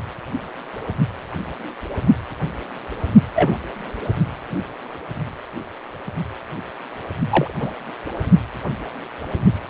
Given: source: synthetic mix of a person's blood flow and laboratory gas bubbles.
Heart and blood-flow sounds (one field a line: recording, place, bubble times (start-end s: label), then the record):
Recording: Doppler ultrasound of blood flow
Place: precordium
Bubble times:
3.35-3.57 s: bubbles
7.29-7.54 s: bubbles
7.60-7.74 s: bubbles
From the record:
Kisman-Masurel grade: 123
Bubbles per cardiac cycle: 1 to 2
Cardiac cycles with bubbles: 10 to 50%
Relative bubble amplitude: loud (0.450 to 0.775)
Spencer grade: 2 (many but less than half of the cardiac periods contain bubble signals, singularly or in groups)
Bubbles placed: only in the low amplitude regions of the cardiac cycle